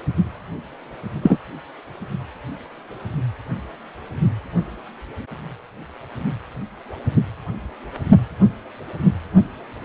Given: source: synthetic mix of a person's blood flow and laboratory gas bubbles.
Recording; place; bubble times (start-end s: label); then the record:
Doppler ultrasound of blood flow; precordium
1.23-1.39 s: bubbles
From the record:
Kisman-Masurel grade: 123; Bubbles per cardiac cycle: 1 to 2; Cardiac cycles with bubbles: 10 to 50%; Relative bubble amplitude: loud (0.450 to 0.775); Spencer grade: 2 (many but less than half of the cardiac periods contain bubble signals, singularly or in groups); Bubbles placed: only in the low amplitude regions of the cardiac cycle